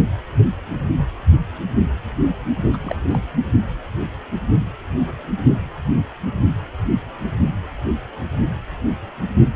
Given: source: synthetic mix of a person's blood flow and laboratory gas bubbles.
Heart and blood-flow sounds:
Doppler ultrasound of blood flow; precordium
2.73-2.77 s: bubbles
2.82-3.20 s: bubbles
From the record:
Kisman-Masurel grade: 211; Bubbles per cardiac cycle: several, 3 to 8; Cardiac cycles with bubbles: 1 to 10%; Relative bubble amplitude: barely perceptible (0.100 to 0.250); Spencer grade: 1 (occasional bubble signal discernible with the cardiac motion signal, with majority of cardiac periods free of bubbles); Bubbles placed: only in the low amplitude regions of the cardiac cycle

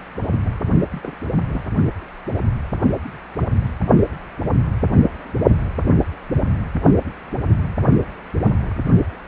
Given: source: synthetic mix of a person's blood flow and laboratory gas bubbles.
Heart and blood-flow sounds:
Doppler ultrasound of blood flow; precordium
0.91-1.15 s: bubbles
1.50-1.65 s: bubbles
From the record:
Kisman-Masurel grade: 211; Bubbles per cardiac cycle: several, 3 to 8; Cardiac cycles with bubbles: 1 to 10%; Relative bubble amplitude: barely perceptible (0.100 to 0.250); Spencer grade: 1 (occasional bubble signal discernible with the cardiac motion signal, with majority of cardiac periods free of bubbles); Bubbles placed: only in the low amplitude regions of the cardiac cycle

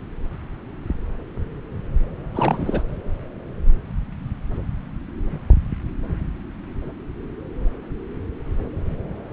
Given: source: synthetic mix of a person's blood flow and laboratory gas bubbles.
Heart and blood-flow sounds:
Doppler ultrasound of blood flow; subclavian vein
2.35-2.82 s: bubbles
From the record:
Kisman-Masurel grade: 212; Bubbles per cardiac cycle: several, 3 to 8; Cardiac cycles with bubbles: 1 to 10%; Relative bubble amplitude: moderate (0.250 to 0.450); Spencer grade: 1 (occasional bubble signal discernible with the cardiac motion signal, with majority of cardiac periods free of bubbles); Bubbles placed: anywhere in the cardiac cycle

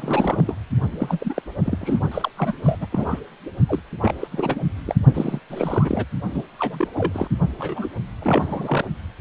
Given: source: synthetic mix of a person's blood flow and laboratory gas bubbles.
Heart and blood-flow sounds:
Doppler ultrasound of blood flow; precordium
0.00-0.57 s: bubbles
0.99-1.42 s: bubbles
1.65-2.00 s: bubbles
2.11-2.31 s: bubbles
2.36-2.52 s: bubbles
2.63-2.86 s: bubbles
2.92-3.19 s: bubbles
3.68-3.79 s: bubbles
4.00-4.12 s: bubbles
4.20-4.28 s: bubbles
4.32-4.60 s: bubbles
4.86-4.95 s: bubbles
5.14-5.39 s: bubbles
5.50-6.04 s: bubbles
6.31-6.42 s: bubbles
6.59-6.88 s: bubbles
6.95-7.28 s: bubbles
7.58-7.90 s: bubbles
8.22-8.88 s: bubbles
From the record:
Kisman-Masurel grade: 342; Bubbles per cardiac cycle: rolling drumbeat, 9 or more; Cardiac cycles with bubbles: 100%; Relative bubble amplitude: moderate (0.250 to 0.450); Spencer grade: 3 (all of the cardiac periods contain showers or single bubble signals, but not dominating or overriding the cardiac motion signals); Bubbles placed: only in the low amplitude regions of the cardiac cycle

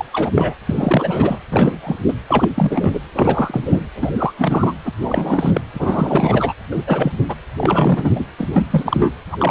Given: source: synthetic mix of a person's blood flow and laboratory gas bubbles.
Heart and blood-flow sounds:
Doppler ultrasound of blood flow; precordium
0.00-0.05 s: bubbles
0.12-0.33 s: bubbles
0.36-0.54 s: bubbles
0.66-1.39 s: bubbles
1.50-1.78 s: bubbles
1.83-1.96 s: bubbles
2.08-2.13 s: bubbles
2.28-2.50 s: bubbles
2.55-3.00 s: bubbles
3.12-3.80 s: bubbles
3.95-4.10 s: bubbles
4.14-4.33 s: bubbles
4.38-4.74 s: bubbles
4.84-4.92 s: bubbles
5.01-5.61 s: bubbles
5.73-6.54 s: bubbles
6.71-6.83 s: bubbles
6.87-7.12 s: bubbles
7.29-7.35 s: bubbles
7.57-8.25 s: bubbles
8.38-8.69 s: bubbles
8.72-9.14 s: bubbles
9.30-9.51 s: bubbles
From the record:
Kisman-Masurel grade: 343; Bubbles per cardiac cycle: rolling drumbeat, 9 or more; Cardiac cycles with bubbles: 100%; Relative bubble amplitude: loud (0.450 to 0.775); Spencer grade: 3 (all of the cardiac periods contain showers or single bubble signals, but not dominating or overriding the cardiac motion signals); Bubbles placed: anywhere in the cardiac cycle

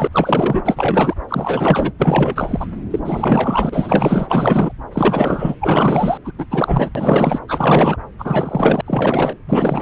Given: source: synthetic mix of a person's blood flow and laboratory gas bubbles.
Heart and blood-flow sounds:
Doppler ultrasound of blood flow; subclavian vein
0.00-0.07 s: bubbles
0.12-1.14 s: bubbles
1.28-1.92 s: bubbles
1.98-2.67 s: bubbles
2.90-3.00 s: bubbles
3.04-4.72 s: bubbles
4.93-5.56 s: bubbles
5.60-6.18 s: bubbles
6.25-6.32 s: bubbles
6.38-6.46 s: bubbles
6.51-6.90 s: bubbles
6.95-7.39 s: bubbles
7.48-7.96 s: bubbles
8.19-8.81 s: bubbles
8.86-9.36 s: bubbles
9.46-9.82 s: bubbles
From the record:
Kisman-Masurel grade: 444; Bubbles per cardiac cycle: continuous sound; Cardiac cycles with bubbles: 100%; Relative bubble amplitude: maximal (0.775 to 0.999); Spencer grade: 4 (maximum detectable bubble signal sounding continuously throughout systole and diastole of every cardiac period, and overriding the amplitude of the normal cardiac signals); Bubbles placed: anywhere in the cardiac cycle

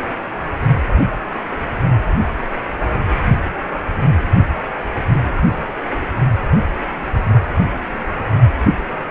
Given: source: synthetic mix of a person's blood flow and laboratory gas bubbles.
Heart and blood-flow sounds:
Doppler ultrasound of blood flow; precordium
no bubbles
From the record:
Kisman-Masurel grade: 000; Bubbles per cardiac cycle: 0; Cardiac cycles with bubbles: 0%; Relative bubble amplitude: no bubbles discernible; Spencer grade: 0 (complete lack of bubble signals)

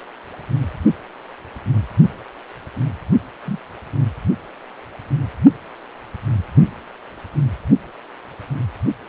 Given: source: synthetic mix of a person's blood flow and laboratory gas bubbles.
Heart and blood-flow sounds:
Doppler ultrasound of blood flow; precordium
3.46-3.59 s: bubbles
From the record:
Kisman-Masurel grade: 111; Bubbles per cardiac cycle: 1 to 2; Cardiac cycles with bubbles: 1 to 10%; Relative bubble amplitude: barely perceptible (0.100 to 0.250); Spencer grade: 1 (occasional bubble signal discernible with the cardiac motion signal, with majority of cardiac periods free of bubbles); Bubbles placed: only in the low amplitude regions of the cardiac cycle

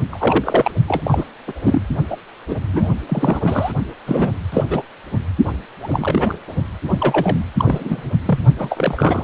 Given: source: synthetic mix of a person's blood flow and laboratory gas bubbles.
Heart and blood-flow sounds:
Doppler ultrasound of blood flow; precordium
0.10-0.71 s: bubbles
0.88-1.24 s: bubbles
1.47-1.53 s: bubbles
1.63-1.81 s: bubbles
2.10-2.17 s: bubbles
2.48-2.56 s: bubbles
2.73-2.88 s: bubbles
3.08-3.72 s: bubbles
4.06-4.29 s: bubbles
4.52-4.64 s: bubbles
4.70-4.83 s: bubbles
5.47-5.53 s: bubbles
5.82-6.38 s: bubbles
6.91-7.46 s: bubbles
7.58-8.12 s: bubbles
8.26-8.39 s: bubbles
8.59-9.24 s: bubbles
From the record:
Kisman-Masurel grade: 243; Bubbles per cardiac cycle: several, 3 to 8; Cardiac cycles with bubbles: 100%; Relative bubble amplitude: loud (0.450 to 0.775); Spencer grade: 3 (all of the cardiac periods contain showers or single bubble signals, but not dominating or overriding the cardiac motion signals); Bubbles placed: only in the low amplitude regions of the cardiac cycle

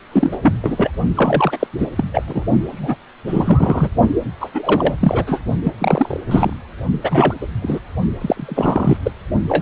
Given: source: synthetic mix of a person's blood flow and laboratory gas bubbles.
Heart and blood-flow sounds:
Doppler ultrasound of blood flow; precordium
0.12-0.38 s: bubbles
0.42-0.54 s: bubbles
0.62-0.91 s: bubbles
1.15-1.67 s: bubbles
1.78-1.88 s: bubbles
1.96-2.08 s: bubbles
2.14-2.23 s: bubbles
2.27-2.45 s: bubbles
2.65-2.96 s: bubbles
3.27-3.89 s: bubbles
4.41-4.50 s: bubbles
4.54-4.94 s: bubbles
5.00-5.41 s: bubbles
5.63-5.73 s: bubbles
5.79-6.20 s: bubbles
6.28-6.53 s: bubbles
7.02-7.35 s: bubbles
7.41-7.47 s: bubbles
7.62-7.80 s: bubbles
8.21-8.97 s: bubbles
9.04-9.12 s: bubbles
9.49-9.62 s: bubbles
From the record:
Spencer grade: 3 (all of the cardiac periods contain showers or single bubble signals, but not dominating or overriding the cardiac motion signals); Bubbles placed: only in the low amplitude regions of the cardiac cycle

